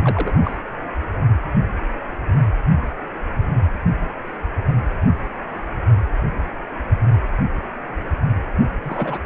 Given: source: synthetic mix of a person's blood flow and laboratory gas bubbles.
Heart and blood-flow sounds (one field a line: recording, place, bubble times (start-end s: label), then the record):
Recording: Doppler ultrasound of blood flow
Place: precordium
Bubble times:
0.04-0.34 s: bubbles
0.43-0.57 s: bubbles
8.84-9.18 s: bubbles
From the record:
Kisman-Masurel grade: 221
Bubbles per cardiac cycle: several, 3 to 8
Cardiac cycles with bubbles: 10 to 50%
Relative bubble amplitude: barely perceptible (0.100 to 0.250)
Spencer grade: 2 (many but less than half of the cardiac periods contain bubble signals, singularly or in groups)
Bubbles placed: only in the low amplitude regions of the cardiac cycle